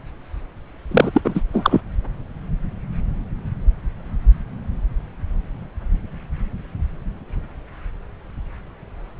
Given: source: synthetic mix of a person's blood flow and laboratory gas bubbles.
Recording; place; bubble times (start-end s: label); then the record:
Doppler ultrasound of blood flow; subclavian vein
0.91-1.10 s: bubbles
1.13-1.21 s: bubbles
1.24-1.41 s: bubbles
1.53-1.81 s: bubbles
From the record:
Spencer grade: 1 (occasional bubble signal discernible with the cardiac motion signal, with majority of cardiac periods free of bubbles); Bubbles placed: anywhere in the cardiac cycle